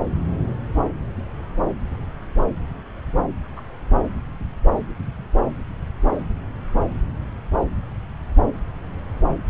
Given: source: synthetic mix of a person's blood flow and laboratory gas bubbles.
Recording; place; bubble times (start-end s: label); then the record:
Doppler ultrasound of blood flow; subclavian vein
3.57-3.61 s: bubbles
From the record:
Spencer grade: 2 (many but less than half of the cardiac periods contain bubble signals, singularly or in groups); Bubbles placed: anywhere in the cardiac cycle